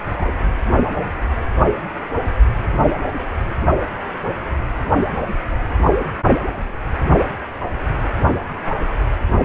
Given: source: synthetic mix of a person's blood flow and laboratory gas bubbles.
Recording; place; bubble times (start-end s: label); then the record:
Doppler ultrasound of blood flow; precordium
0.17-0.34 s: bubbles
From the record:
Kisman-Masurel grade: 112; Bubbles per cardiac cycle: 1 to 2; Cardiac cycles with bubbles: 1 to 10%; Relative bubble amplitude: moderate (0.250 to 0.450); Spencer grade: 1 (occasional bubble signal discernible with the cardiac motion signal, with majority of cardiac periods free of bubbles); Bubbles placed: only in the low amplitude regions of the cardiac cycle